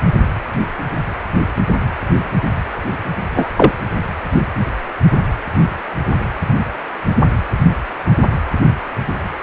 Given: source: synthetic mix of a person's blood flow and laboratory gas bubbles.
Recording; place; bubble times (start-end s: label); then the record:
Doppler ultrasound of blood flow; precordium
3.36-3.48 s: bubbles
3.56-3.72 s: bubbles
From the record:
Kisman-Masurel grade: 113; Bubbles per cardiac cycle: 1 to 2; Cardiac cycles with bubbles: 1 to 10%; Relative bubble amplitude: loud (0.450 to 0.775); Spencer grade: 1 (occasional bubble signal discernible with the cardiac motion signal, with majority of cardiac periods free of bubbles); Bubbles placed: anywhere in the cardiac cycle